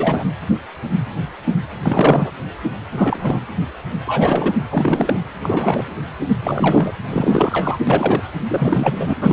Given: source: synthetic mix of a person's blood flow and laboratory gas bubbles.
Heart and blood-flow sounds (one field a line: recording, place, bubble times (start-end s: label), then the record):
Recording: Doppler ultrasound of blood flow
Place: precordium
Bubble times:
0.00-0.23 s: bubbles
1.82-2.32 s: bubbles
2.92-3.42 s: bubbles
4.07-4.54 s: bubbles
4.71-5.21 s: bubbles
5.42-5.85 s: bubbles
6.44-6.92 s: bubbles
7.10-7.79 s: bubbles
7.87-8.21 s: bubbles
8.49-9.15 s: bubbles
9.21-9.32 s: bubbles
From the record:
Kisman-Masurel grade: 333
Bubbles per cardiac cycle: rolling drumbeat, 9 or more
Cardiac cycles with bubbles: 50 to 99%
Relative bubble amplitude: loud (0.450 to 0.775)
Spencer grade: 3 (all of the cardiac periods contain showers or single bubble signals, but not dominating or overriding the cardiac motion signals)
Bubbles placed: anywhere in the cardiac cycle